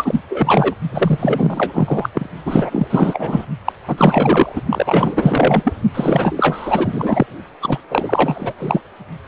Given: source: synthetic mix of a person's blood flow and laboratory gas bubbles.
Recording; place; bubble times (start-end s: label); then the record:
Doppler ultrasound of blood flow; precordium
0.00-0.20 s: bubbles
0.29-0.74 s: bubbles
0.92-2.10 s: bubbles
2.13-2.29 s: bubbles
2.45-2.87 s: bubbles
2.90-3.46 s: bubbles
3.65-3.73 s: bubbles
3.88-4.61 s: bubbles
4.69-5.73 s: bubbles
5.95-7.26 s: bubbles
7.61-7.79 s: bubbles
7.90-8.54 s: bubbles
8.59-8.80 s: bubbles
From the record:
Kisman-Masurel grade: 444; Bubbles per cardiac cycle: continuous sound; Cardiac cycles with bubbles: 100%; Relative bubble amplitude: maximal (0.775 to 0.999); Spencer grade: 4 (maximum detectable bubble signal sounding continuously throughout systole and diastole of every cardiac period, and overriding the amplitude of the normal cardiac signals); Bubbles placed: only in the low amplitude regions of the cardiac cycle